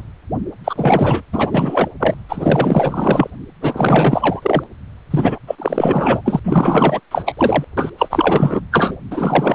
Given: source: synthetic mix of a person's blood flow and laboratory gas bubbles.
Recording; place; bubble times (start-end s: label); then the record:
Doppler ultrasound of blood flow; precordium
0.64-1.22 s: bubbles
1.32-1.89 s: bubbles
2.00-2.14 s: bubbles
2.29-3.30 s: bubbles
3.61-4.64 s: bubbles
5.11-5.39 s: bubbles
5.47-5.55 s: bubbles
5.58-6.21 s: bubbles
6.25-6.40 s: bubbles
6.44-7.00 s: bubbles
7.11-7.65 s: bubbles
7.77-7.90 s: bubbles
7.98-8.60 s: bubbles
8.71-8.96 s: bubbles
9.10-9.55 s: bubbles
From the record:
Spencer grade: 4 (maximum detectable bubble signal sounding continuously throughout systole and diastole of every cardiac period, and overriding the amplitude of the normal cardiac signals); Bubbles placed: anywhere in the cardiac cycle